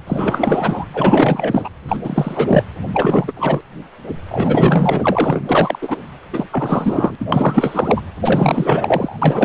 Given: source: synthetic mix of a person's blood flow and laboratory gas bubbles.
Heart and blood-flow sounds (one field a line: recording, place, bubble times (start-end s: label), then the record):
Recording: Doppler ultrasound of blood flow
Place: precordium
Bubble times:
0.06-0.85 s: bubbles
0.94-1.69 s: bubbles
1.87-1.97 s: bubbles
2.04-2.64 s: bubbles
2.93-3.32 s: bubbles
3.36-3.61 s: bubbles
4.29-5.42 s: bubbles
5.49-5.97 s: bubbles
6.33-6.48 s: bubbles
6.51-7.15 s: bubbles
7.19-7.25 s: bubbles
7.32-8.02 s: bubbles
8.21-9.18 s: bubbles
9.21-9.45 s: bubbles
From the record:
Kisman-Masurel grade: 444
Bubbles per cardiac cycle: continuous sound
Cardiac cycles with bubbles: 100%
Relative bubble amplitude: maximal (0.775 to 0.999)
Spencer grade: 4 (maximum detectable bubble signal sounding continuously throughout systole and diastole of every cardiac period, and overriding the amplitude of the normal cardiac signals)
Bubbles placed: anywhere in the cardiac cycle